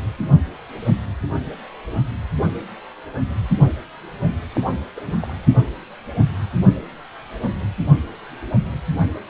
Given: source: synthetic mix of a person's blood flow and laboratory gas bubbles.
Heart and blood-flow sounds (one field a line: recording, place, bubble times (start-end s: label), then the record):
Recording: Doppler ultrasound of blood flow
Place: precordium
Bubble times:
4.54-4.61 s: bubbles
4.96-5.00 s: bubbles
5.06-5.12 s: bubbles
5.20-5.33 s: bubbles
From the record:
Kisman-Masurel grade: 221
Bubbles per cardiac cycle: several, 3 to 8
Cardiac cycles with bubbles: 10 to 50%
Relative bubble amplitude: barely perceptible (0.100 to 0.250)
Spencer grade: 2 (many but less than half of the cardiac periods contain bubble signals, singularly or in groups)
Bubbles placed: anywhere in the cardiac cycle